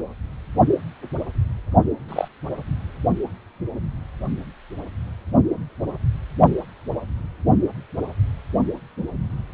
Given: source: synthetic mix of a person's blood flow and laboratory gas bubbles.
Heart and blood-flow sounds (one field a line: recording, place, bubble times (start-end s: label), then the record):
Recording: Doppler ultrasound of blood flow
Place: precordium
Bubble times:
2.08-2.28 s: bubbles
From the record:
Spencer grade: 1 (occasional bubble signal discernible with the cardiac motion signal, with majority of cardiac periods free of bubbles)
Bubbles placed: only in the low amplitude regions of the cardiac cycle